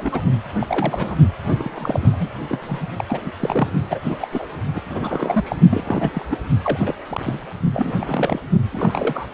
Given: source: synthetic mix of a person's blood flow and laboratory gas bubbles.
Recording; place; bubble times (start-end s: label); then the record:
Doppler ultrasound of blood flow; precordium
0.00-0.21 s: bubbles
0.59-1.16 s: bubbles
1.44-2.27 s: bubbles
2.49-2.78 s: bubbles
2.96-3.04 s: bubbles
3.08-3.21 s: bubbles
3.25-3.31 s: bubbles
3.40-3.73 s: bubbles
3.90-4.18 s: bubbles
4.20-4.28 s: bubbles
4.32-4.47 s: bubbles
4.75-4.82 s: bubbles
4.89-5.56 s: bubbles
5.69-6.26 s: bubbles
6.30-6.39 s: bubbles
6.62-6.94 s: bubbles
7.10-7.40 s: bubbles
7.73-7.95 s: bubbles
8.01-8.39 s: bubbles
8.71-9.27 s: bubbles
From the record:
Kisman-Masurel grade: 342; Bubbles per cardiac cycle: rolling drumbeat, 9 or more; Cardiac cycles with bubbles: 100%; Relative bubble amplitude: moderate (0.250 to 0.450); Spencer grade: 3 (all of the cardiac periods contain showers or single bubble signals, but not dominating or overriding the cardiac motion signals); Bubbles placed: only in the low amplitude regions of the cardiac cycle